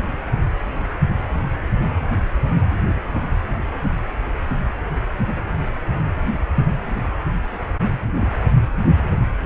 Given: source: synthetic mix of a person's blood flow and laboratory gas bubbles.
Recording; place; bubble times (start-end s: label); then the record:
Doppler ultrasound of blood flow; precordium
8.19-8.29 s: bubbles
From the record:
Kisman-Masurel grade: 111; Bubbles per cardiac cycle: 1 to 2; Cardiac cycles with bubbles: 1 to 10%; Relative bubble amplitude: barely perceptible (0.100 to 0.250); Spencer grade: 1 (occasional bubble signal discernible with the cardiac motion signal, with majority of cardiac periods free of bubbles); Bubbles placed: anywhere in the cardiac cycle